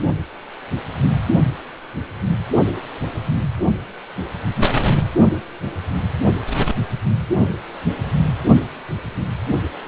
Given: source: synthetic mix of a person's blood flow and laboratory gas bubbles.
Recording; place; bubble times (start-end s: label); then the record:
Doppler ultrasound of blood flow; precordium
no bubbles
From the record:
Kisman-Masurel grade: 000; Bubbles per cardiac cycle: 0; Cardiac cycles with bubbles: 0%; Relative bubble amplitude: no bubbles discernible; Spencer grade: 0 (complete lack of bubble signals)